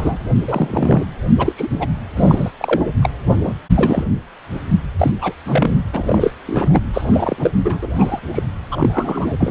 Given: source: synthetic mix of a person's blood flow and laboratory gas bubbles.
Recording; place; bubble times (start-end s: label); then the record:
Doppler ultrasound of blood flow; precordium
0.00-0.18 s: bubbles
0.48-1.04 s: bubbles
1.38-1.53 s: bubbles
1.56-1.68 s: bubbles
1.79-1.89 s: bubbles
2.16-2.50 s: bubbles
2.58-2.82 s: bubbles
3.02-3.10 s: bubbles
3.27-3.54 s: bubbles
3.76-4.04 s: bubbles
4.98-5.11 s: bubbles
5.21-5.32 s: bubbles
5.45-5.80 s: bubbles
5.93-6.31 s: bubbles
6.46-6.80 s: bubbles
6.93-7.50 s: bubbles
7.65-7.79 s: bubbles
7.83-7.87 s: bubbles
7.95-8.20 s: bubbles
8.34-8.43 s: bubbles
8.71-9.34 s: bubbles
9.38-9.51 s: bubbles
From the record:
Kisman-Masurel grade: 243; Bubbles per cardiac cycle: several, 3 to 8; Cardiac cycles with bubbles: 100%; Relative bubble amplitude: loud (0.450 to 0.775); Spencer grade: 3 (all of the cardiac periods contain showers or single bubble signals, but not dominating or overriding the cardiac motion signals); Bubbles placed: anywhere in the cardiac cycle